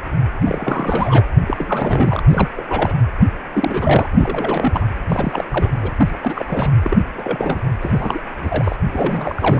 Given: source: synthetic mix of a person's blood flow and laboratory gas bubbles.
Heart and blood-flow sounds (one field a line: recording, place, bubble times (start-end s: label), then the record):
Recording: Doppler ultrasound of blood flow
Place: precordium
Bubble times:
0.44-1.24 s: bubbles
1.47-2.23 s: bubbles
2.30-2.49 s: bubbles
2.57-2.62 s: bubbles
2.69-2.95 s: bubbles
3.54-4.84 s: bubbles
5.08-5.44 s: bubbles
5.50-5.79 s: bubbles
5.81-5.91 s: bubbles
5.96-6.44 s: bubbles
6.47-6.72 s: bubbles
6.83-6.97 s: bubbles
7.17-7.59 s: bubbles
7.80-8.19 s: bubbles
8.40-8.76 s: bubbles
8.92-9.60 s: bubbles
From the record:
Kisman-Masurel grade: 342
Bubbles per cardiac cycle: rolling drumbeat, 9 or more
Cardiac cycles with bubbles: 100%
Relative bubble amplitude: moderate (0.250 to 0.450)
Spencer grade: 3 (all of the cardiac periods contain showers or single bubble signals, but not dominating or overriding the cardiac motion signals)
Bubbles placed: anywhere in the cardiac cycle